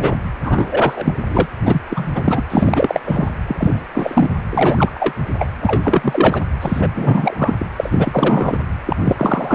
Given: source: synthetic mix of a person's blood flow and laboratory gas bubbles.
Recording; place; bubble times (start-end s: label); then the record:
Doppler ultrasound of blood flow; precordium
0.00-0.17 s: bubbles
0.43-1.14 s: bubbles
1.25-1.47 s: bubbles
1.64-1.81 s: bubbles
1.90-2.12 s: bubbles
2.14-2.42 s: bubbles
2.50-3.00 s: bubbles
3.04-3.35 s: bubbles
3.47-3.82 s: bubbles
3.95-4.29 s: bubbles
4.50-4.90 s: bubbles
4.95-5.12 s: bubbles
5.38-5.49 s: bubbles
5.61-6.42 s: bubbles
6.61-6.88 s: bubbles
6.95-7.66 s: bubbles
7.76-8.58 s: bubbles
8.86-8.96 s: bubbles
9.05-9.55 s: bubbles
From the record:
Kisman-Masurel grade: 343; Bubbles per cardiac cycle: rolling drumbeat, 9 or more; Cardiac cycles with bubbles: 100%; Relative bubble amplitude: loud (0.450 to 0.775); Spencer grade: 3 (all of the cardiac periods contain showers or single bubble signals, but not dominating or overriding the cardiac motion signals); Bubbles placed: anywhere in the cardiac cycle